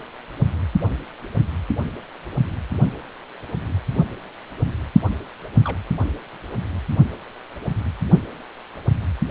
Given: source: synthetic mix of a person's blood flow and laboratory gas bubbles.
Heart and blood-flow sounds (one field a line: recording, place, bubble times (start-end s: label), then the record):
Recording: Doppler ultrasound of blood flow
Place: precordium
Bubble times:
5.64-5.78 s: bubbles
From the record:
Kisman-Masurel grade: 111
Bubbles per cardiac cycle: 1 to 2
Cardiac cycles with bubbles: 1 to 10%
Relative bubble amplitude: barely perceptible (0.100 to 0.250)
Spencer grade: 1 (occasional bubble signal discernible with the cardiac motion signal, with majority of cardiac periods free of bubbles)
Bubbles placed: only in the low amplitude regions of the cardiac cycle